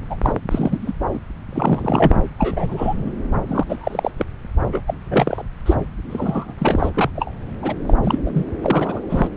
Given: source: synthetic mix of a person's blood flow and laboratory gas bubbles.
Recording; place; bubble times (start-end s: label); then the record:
Doppler ultrasound of blood flow; subclavian vein
0.10-0.17 s: bubbles
0.22-0.33 s: bubbles
0.50-0.79 s: bubbles
0.81-0.93 s: bubbles
1.13-1.19 s: bubbles
1.50-2.16 s: bubbles
2.39-3.12 s: bubbles
3.47-4.11 s: bubbles
4.17-4.25 s: bubbles
4.72-4.82 s: bubbles
4.87-4.94 s: bubbles
5.05-5.47 s: bubbles
5.65-5.75 s: bubbles
6.09-6.54 s: bubbles
6.58-6.89 s: bubbles
6.93-7.10 s: bubbles
7.15-7.31 s: bubbles
7.62-7.75 s: bubbles
7.87-7.94 s: bubbles
8.03-8.19 s: bubbles
8.25-8.31 s: bubbles
8.34-8.46 s: bubbles
8.62-9.02 s: bubbles
9.09-9.28 s: bubbles
From the record:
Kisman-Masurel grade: 242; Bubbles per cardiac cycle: several, 3 to 8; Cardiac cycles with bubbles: 100%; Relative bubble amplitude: moderate (0.250 to 0.450); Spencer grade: 3 (all of the cardiac periods contain showers or single bubble signals, but not dominating or overriding the cardiac motion signals); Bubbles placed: anywhere in the cardiac cycle